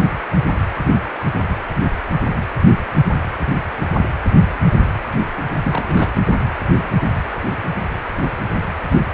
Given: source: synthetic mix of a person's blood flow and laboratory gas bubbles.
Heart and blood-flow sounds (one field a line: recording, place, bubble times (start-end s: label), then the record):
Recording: Doppler ultrasound of blood flow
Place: precordium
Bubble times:
5.63-6.11 s: bubbles
From the record:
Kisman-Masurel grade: 212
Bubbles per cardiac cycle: several, 3 to 8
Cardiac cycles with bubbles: 1 to 10%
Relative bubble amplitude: moderate (0.250 to 0.450)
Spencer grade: 1 (occasional bubble signal discernible with the cardiac motion signal, with majority of cardiac periods free of bubbles)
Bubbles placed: anywhere in the cardiac cycle